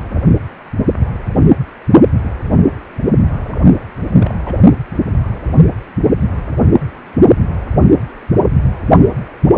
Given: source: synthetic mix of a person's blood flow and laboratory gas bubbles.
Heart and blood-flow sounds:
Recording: Doppler ultrasound of blood flow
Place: precordium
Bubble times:
3.45-3.57 s: bubbles
4.14-4.34 s: bubbles
4.44-4.55 s: bubbles
From the record:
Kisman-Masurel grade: 221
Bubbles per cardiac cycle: several, 3 to 8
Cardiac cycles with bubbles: 10 to 50%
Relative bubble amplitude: barely perceptible (0.100 to 0.250)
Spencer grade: 2 (many but less than half of the cardiac periods contain bubble signals, singularly or in groups)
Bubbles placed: only in the low amplitude regions of the cardiac cycle

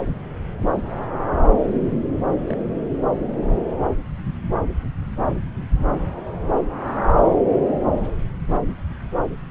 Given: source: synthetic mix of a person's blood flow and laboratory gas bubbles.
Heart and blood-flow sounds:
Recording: Doppler ultrasound of blood flow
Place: subclavian vein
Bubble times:
2.29-2.58 s: bubbles
From the record:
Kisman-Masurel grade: 111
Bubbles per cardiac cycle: 1 to 2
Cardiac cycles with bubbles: 1 to 10%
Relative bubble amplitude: barely perceptible (0.100 to 0.250)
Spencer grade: 1 (occasional bubble signal discernible with the cardiac motion signal, with majority of cardiac periods free of bubbles)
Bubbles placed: anywhere in the cardiac cycle

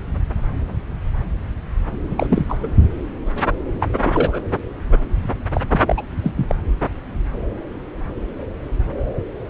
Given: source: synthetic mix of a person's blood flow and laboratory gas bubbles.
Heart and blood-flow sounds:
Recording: Doppler ultrasound of blood flow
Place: subclavian vein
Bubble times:
2.10-2.46 s: bubbles
2.48-2.58 s: bubbles
2.62-2.69 s: bubbles
3.80-3.89 s: bubbles
3.97-4.41 s: bubbles
5.53-5.61 s: bubbles
5.69-5.81 s: bubbles
5.86-6.04 s: bubbles
6.22-6.32 s: bubbles
6.37-6.55 s: bubbles
From the record:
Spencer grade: 2 (many but less than half of the cardiac periods contain bubble signals, singularly or in groups)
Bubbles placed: anywhere in the cardiac cycle

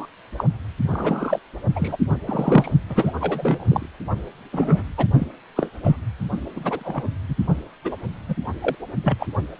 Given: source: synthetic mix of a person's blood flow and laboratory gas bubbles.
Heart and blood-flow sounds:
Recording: Doppler ultrasound of blood flow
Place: precordium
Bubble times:
0.00-0.05 s: bubbles
0.38-0.45 s: bubbles
0.87-1.39 s: bubbles
1.75-1.97 s: bubbles
2.26-2.73 s: bubbles
2.89-3.12 s: bubbles
3.21-3.65 s: bubbles
3.68-3.86 s: bubbles
4.52-4.85 s: bubbles
4.97-5.06 s: bubbles
5.18-5.26 s: bubbles
5.56-5.71 s: bubbles
5.83-5.96 s: bubbles
6.52-7.03 s: bubbles
7.29-7.35 s: bubbles
7.84-7.96 s: bubbles
8.28-8.35 s: bubbles
8.61-8.76 s: bubbles
9.03-9.27 s: bubbles
From the record:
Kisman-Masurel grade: 242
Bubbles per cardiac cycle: several, 3 to 8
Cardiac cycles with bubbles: 100%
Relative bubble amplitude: moderate (0.250 to 0.450)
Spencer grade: 3 (all of the cardiac periods contain showers or single bubble signals, but not dominating or overriding the cardiac motion signals)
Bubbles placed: only in the low amplitude regions of the cardiac cycle

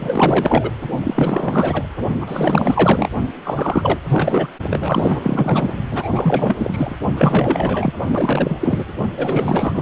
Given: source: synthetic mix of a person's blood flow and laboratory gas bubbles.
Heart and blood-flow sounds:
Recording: Doppler ultrasound of blood flow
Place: precordium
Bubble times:
0.00-0.70 s: bubbles
1.03-1.88 s: bubbles
2.20-3.08 s: bubbles
3.44-3.99 s: bubbles
4.08-4.50 s: bubbles
4.70-5.73 s: bubbles
5.91-6.96 s: bubbles
7.16-7.93 s: bubbles
8.07-8.84 s: bubbles
9.17-9.82 s: bubbles
From the record:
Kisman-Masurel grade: 444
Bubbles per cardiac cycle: continuous sound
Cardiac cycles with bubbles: 100%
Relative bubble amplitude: maximal (0.775 to 0.999)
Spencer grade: 4 (maximum detectable bubble signal sounding continuously throughout systole and diastole of every cardiac period, and overriding the amplitude of the normal cardiac signals)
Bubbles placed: only in the low amplitude regions of the cardiac cycle

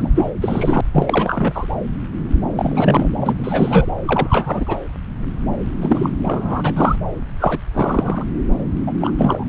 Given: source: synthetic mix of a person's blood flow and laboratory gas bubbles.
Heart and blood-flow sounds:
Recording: Doppler ultrasound of blood flow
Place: subclavian vein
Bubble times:
0.00-0.09 s: bubbles
0.15-0.31 s: bubbles
0.42-0.81 s: bubbles
0.93-1.66 s: bubbles
2.55-3.08 s: bubbles
3.21-3.87 s: bubbles
4.05-4.78 s: bubbles
5.81-6.09 s: bubbles
6.25-6.72 s: bubbles
6.76-6.96 s: bubbles
7.40-7.60 s: bubbles
7.73-8.24 s: bubbles
8.87-8.94 s: bubbles
9.01-9.12 s: bubbles
9.18-9.44 s: bubbles
From the record:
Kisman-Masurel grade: 332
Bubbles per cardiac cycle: rolling drumbeat, 9 or more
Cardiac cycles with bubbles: 50 to 99%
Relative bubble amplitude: moderate (0.250 to 0.450)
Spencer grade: 3 (all of the cardiac periods contain showers or single bubble signals, but not dominating or overriding the cardiac motion signals)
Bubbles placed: anywhere in the cardiac cycle

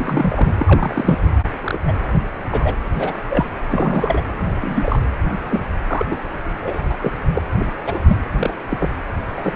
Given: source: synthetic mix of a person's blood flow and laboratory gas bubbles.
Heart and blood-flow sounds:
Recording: Doppler ultrasound of blood flow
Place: precordium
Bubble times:
0.00-0.55 s: bubbles
0.58-1.19 s: bubbles
1.60-1.82 s: bubbles
1.87-1.94 s: bubbles
2.51-2.75 s: bubbles
2.85-3.13 s: bubbles
3.29-3.50 s: bubbles
3.71-4.21 s: bubbles
4.39-4.48 s: bubbles
4.61-4.99 s: bubbles
5.50-5.61 s: bubbles
5.87-6.17 s: bubbles
6.61-6.84 s: bubbles
6.90-6.96 s: bubbles
7.02-7.12 s: bubbles
7.34-7.42 s: bubbles
7.59-7.66 s: bubbles
7.86-8.03 s: bubbles
8.08-8.16 s: bubbles
8.37-8.58 s: bubbles
8.70-8.89 s: bubbles
9.36-9.53 s: bubbles
From the record:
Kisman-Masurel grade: 242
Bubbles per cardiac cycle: several, 3 to 8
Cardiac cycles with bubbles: 100%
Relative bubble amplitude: moderate (0.250 to 0.450)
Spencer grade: 3 (all of the cardiac periods contain showers or single bubble signals, but not dominating or overriding the cardiac motion signals)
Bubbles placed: anywhere in the cardiac cycle

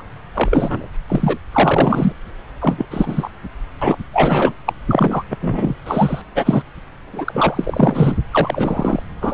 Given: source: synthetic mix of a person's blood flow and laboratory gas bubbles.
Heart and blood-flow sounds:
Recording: Doppler ultrasound of blood flow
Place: subclavian vein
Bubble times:
0.00-0.02 s: bubbles
0.33-0.89 s: bubbles
1.08-1.39 s: bubbles
1.51-2.12 s: bubbles
2.60-2.85 s: bubbles
2.90-3.29 s: bubbles
3.81-3.98 s: bubbles
4.13-4.54 s: bubbles
4.66-4.73 s: bubbles
4.90-5.23 s: bubbles
5.30-5.37 s: bubbles
5.40-5.73 s: bubbles
5.86-6.22 s: bubbles
6.35-6.62 s: bubbles
7.12-8.13 s: bubbles
8.31-9.03 s: bubbles
9.21-9.34 s: bubbles
From the record:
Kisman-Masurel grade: 343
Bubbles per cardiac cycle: rolling drumbeat, 9 or more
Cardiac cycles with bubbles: 100%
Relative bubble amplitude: loud (0.450 to 0.775)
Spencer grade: 3 (all of the cardiac periods contain showers or single bubble signals, but not dominating or overriding the cardiac motion signals)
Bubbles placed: anywhere in the cardiac cycle

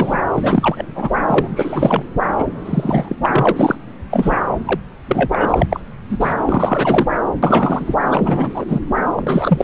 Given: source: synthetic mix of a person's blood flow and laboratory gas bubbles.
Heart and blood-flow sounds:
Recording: Doppler ultrasound of blood flow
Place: subclavian vein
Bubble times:
0.00-0.20 s: bubbles
0.33-1.10 s: bubbles
1.28-2.07 s: bubbles
2.38-2.46 s: bubbles
2.65-3.16 s: bubbles
3.22-3.52 s: bubbles
3.56-3.75 s: bubbles
4.10-4.42 s: bubbles
4.67-4.80 s: bubbles
5.07-5.66 s: bubbles
5.70-5.80 s: bubbles
6.09-6.34 s: bubbles
6.45-7.06 s: bubbles
7.42-7.94 s: bubbles
8.05-8.79 s: bubbles
9.16-9.64 s: bubbles
From the record:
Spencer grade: 3 (all of the cardiac periods contain showers or single bubble signals, but not dominating or overriding the cardiac motion signals)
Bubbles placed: anywhere in the cardiac cycle

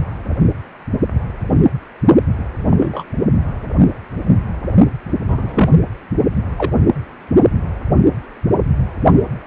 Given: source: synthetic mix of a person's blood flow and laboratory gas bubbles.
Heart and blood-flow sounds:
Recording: Doppler ultrasound of blood flow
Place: precordium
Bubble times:
2.69-3.04 s: bubbles
5.28-5.70 s: bubbles
6.57-6.72 s: bubbles
From the record:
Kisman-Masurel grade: 123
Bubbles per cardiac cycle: 1 to 2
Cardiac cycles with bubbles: 10 to 50%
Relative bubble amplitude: loud (0.450 to 0.775)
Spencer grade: 2 (many but less than half of the cardiac periods contain bubble signals, singularly or in groups)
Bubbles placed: only in the low amplitude regions of the cardiac cycle

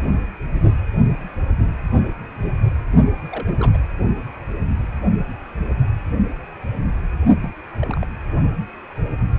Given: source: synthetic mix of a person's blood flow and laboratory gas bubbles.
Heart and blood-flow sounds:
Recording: Doppler ultrasound of blood flow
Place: precordium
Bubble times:
3.31-3.77 s: bubbles
7.41-7.48 s: bubbles
7.80-8.04 s: bubbles
From the record:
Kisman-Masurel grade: 221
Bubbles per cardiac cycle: several, 3 to 8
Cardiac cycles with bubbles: 10 to 50%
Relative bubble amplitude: barely perceptible (0.100 to 0.250)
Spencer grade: 2 (many but less than half of the cardiac periods contain bubble signals, singularly or in groups)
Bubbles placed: only in the low amplitude regions of the cardiac cycle

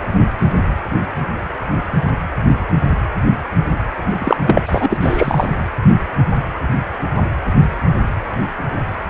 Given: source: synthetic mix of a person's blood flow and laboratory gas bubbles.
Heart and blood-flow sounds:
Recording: Doppler ultrasound of blood flow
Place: precordium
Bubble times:
4.19-4.37 s: bubbles
4.47-5.48 s: bubbles
From the record:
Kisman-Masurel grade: 213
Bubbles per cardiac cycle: several, 3 to 8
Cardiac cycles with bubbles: 1 to 10%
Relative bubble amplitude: loud (0.450 to 0.775)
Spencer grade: 1 (occasional bubble signal discernible with the cardiac motion signal, with majority of cardiac periods free of bubbles)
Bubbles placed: anywhere in the cardiac cycle

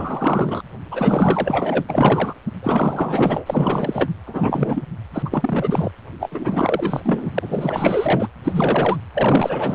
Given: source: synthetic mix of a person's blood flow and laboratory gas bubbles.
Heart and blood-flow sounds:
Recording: Doppler ultrasound of blood flow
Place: precordium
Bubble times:
0.00-0.62 s: bubbles
0.91-1.85 s: bubbles
1.89-2.34 s: bubbles
2.62-4.11 s: bubbles
4.26-4.83 s: bubbles
5.13-5.22 s: bubbles
5.25-5.91 s: bubbles
6.19-7.31 s: bubbles
7.34-8.29 s: bubbles
8.43-8.99 s: bubbles
9.13-9.75 s: bubbles
From the record:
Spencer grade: 4 (maximum detectable bubble signal sounding continuously throughout systole and diastole of every cardiac period, and overriding the amplitude of the normal cardiac signals)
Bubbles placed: anywhere in the cardiac cycle

